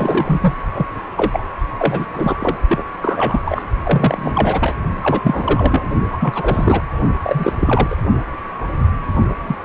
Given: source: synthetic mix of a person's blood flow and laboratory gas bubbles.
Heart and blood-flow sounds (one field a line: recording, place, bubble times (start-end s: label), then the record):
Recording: Doppler ultrasound of blood flow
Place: precordium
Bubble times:
0.00-0.54 s: bubbles
0.73-0.86 s: bubbles
1.17-1.44 s: bubbles
1.79-2.06 s: bubbles
2.13-2.36 s: bubbles
2.40-2.58 s: bubbles
2.68-2.83 s: bubbles
3.02-3.40 s: bubbles
3.45-3.65 s: bubbles
3.84-4.75 s: bubbles
5.03-5.90 s: bubbles
6.12-6.81 s: bubbles
7.24-7.96 s: bubbles
9.47-9.55 s: bubbles
From the record:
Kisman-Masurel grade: 333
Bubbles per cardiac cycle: rolling drumbeat, 9 or more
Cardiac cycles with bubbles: 50 to 99%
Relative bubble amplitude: loud (0.450 to 0.775)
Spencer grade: 3 (all of the cardiac periods contain showers or single bubble signals, but not dominating or overriding the cardiac motion signals)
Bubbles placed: only in the low amplitude regions of the cardiac cycle